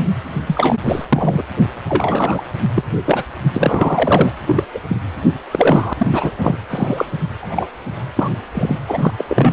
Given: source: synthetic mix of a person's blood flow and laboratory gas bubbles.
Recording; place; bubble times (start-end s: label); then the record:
Doppler ultrasound of blood flow; precordium
0.00-0.07 s: bubbles
0.47-0.76 s: bubbles
0.88-1.06 s: bubbles
1.12-1.43 s: bubbles
1.89-2.41 s: bubbles
2.75-2.84 s: bubbles
3.06-3.23 s: bubbles
3.52-4.31 s: bubbles
4.46-4.64 s: bubbles
4.74-4.79 s: bubbles
4.89-4.97 s: bubbles
5.51-5.93 s: bubbles
5.97-6.07 s: bubbles
6.12-6.31 s: bubbles
6.39-6.57 s: bubbles
6.70-7.05 s: bubbles
7.42-7.69 s: bubbles
8.15-8.29 s: bubbles
8.54-8.75 s: bubbles
8.88-9.11 s: bubbles
9.17-9.24 s: bubbles
9.29-9.53 s: bubbles
From the record:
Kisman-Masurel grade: 243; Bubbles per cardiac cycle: several, 3 to 8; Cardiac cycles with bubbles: 100%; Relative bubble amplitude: loud (0.450 to 0.775); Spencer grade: 3 (all of the cardiac periods contain showers or single bubble signals, but not dominating or overriding the cardiac motion signals); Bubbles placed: anywhere in the cardiac cycle